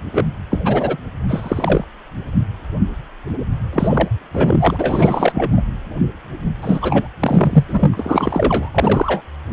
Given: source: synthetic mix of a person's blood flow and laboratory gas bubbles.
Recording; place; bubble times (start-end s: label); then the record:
Doppler ultrasound of blood flow; precordium
0.11-0.24 s: bubbles
0.51-0.60 s: bubbles
0.65-0.97 s: bubbles
1.28-1.85 s: bubbles
3.73-4.08 s: bubbles
4.33-5.62 s: bubbles
6.62-7.08 s: bubbles
7.20-7.65 s: bubbles
7.68-8.70 s: bubbles
8.74-9.21 s: bubbles
From the record:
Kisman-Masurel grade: 333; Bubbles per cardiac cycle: rolling drumbeat, 9 or more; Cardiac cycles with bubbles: 50 to 99%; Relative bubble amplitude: loud (0.450 to 0.775); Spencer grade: 3 (all of the cardiac periods contain showers or single bubble signals, but not dominating or overriding the cardiac motion signals); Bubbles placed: anywhere in the cardiac cycle